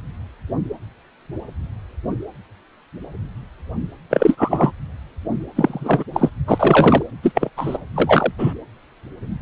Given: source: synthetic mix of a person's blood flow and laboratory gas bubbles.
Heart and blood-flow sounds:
Doppler ultrasound of blood flow; precordium
4.10-4.71 s: bubbles
5.56-6.04 s: bubbles
6.14-6.29 s: bubbles
6.47-7.03 s: bubbles
7.23-7.50 s: bubbles
7.57-7.78 s: bubbles
7.95-8.31 s: bubbles
8.38-8.53 s: bubbles
From the record:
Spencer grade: 2 (many but less than half of the cardiac periods contain bubble signals, singularly or in groups); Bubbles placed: anywhere in the cardiac cycle

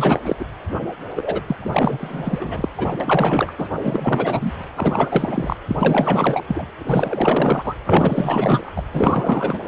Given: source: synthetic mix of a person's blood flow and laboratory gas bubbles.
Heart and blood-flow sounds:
Doppler ultrasound of blood flow; precordium
0.00-0.22 s: bubbles
0.25-0.35 s: bubbles
0.39-0.46 s: bubbles
1.16-1.42 s: bubbles
1.46-1.56 s: bubbles
1.59-2.69 s: bubbles
2.77-2.96 s: bubbles
3.00-3.53 s: bubbles
3.58-3.70 s: bubbles
3.83-4.53 s: bubbles
4.75-5.56 s: bubbles
5.68-6.44 s: bubbles
6.47-6.65 s: bubbles
6.78-7.74 s: bubbles
7.85-8.72 s: bubbles
8.75-8.83 s: bubbles
8.92-9.58 s: bubbles
From the record:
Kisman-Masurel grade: 444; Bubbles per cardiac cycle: continuous sound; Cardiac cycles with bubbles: 100%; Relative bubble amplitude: maximal (0.775 to 0.999); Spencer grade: 4 (maximum detectable bubble signal sounding continuously throughout systole and diastole of every cardiac period, and overriding the amplitude of the normal cardiac signals); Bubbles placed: anywhere in the cardiac cycle

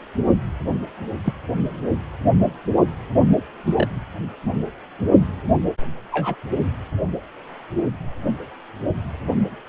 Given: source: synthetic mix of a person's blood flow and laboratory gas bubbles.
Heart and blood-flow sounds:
Doppler ultrasound of blood flow; precordium
1.25-1.33 s: bubbles
3.66-3.87 s: bubbles
6.12-6.36 s: bubbles
From the record:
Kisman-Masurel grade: 122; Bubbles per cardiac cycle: 1 to 2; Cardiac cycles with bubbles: 10 to 50%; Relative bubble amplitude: moderate (0.250 to 0.450); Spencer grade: 2 (many but less than half of the cardiac periods contain bubble signals, singularly or in groups); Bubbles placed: only in the low amplitude regions of the cardiac cycle

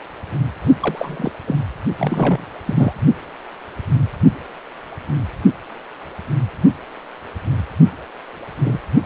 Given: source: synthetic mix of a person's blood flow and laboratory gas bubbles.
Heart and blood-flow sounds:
Doppler ultrasound of blood flow; precordium
0.80-1.32 s: bubbles
1.47-1.56 s: bubbles
1.98-2.46 s: bubbles
2.65-2.93 s: bubbles
8.62-8.79 s: bubbles
From the record:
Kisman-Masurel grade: 222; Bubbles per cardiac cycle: several, 3 to 8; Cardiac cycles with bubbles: 10 to 50%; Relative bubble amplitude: moderate (0.250 to 0.450); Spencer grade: 2 (many but less than half of the cardiac periods contain bubble signals, singularly or in groups); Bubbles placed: only in the low amplitude regions of the cardiac cycle

